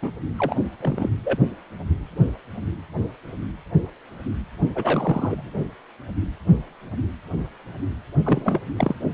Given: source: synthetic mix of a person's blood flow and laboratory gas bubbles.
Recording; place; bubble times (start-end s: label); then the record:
Doppler ultrasound of blood flow; precordium
0.02-0.10 s: bubbles
0.38-0.56 s: bubbles
0.80-1.09 s: bubbles
1.24-1.38 s: bubbles
4.75-5.50 s: bubbles
8.23-8.61 s: bubbles
8.77-8.96 s: bubbles
From the record:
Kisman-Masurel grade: 222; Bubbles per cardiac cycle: several, 3 to 8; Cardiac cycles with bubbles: 10 to 50%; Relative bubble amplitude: moderate (0.250 to 0.450); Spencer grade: 2 (many but less than half of the cardiac periods contain bubble signals, singularly or in groups); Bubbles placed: only in the low amplitude regions of the cardiac cycle